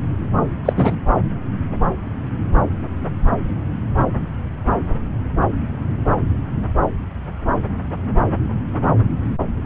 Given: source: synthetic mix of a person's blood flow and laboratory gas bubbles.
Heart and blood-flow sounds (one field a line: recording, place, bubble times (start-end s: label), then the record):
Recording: Doppler ultrasound of blood flow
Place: subclavian vein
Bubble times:
0.65-0.73 s: bubbles
0.75-0.96 s: bubbles
From the record:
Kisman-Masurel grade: 113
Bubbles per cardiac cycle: 1 to 2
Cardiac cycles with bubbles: 1 to 10%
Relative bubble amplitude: loud (0.450 to 0.775)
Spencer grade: 1 (occasional bubble signal discernible with the cardiac motion signal, with majority of cardiac periods free of bubbles)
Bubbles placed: anywhere in the cardiac cycle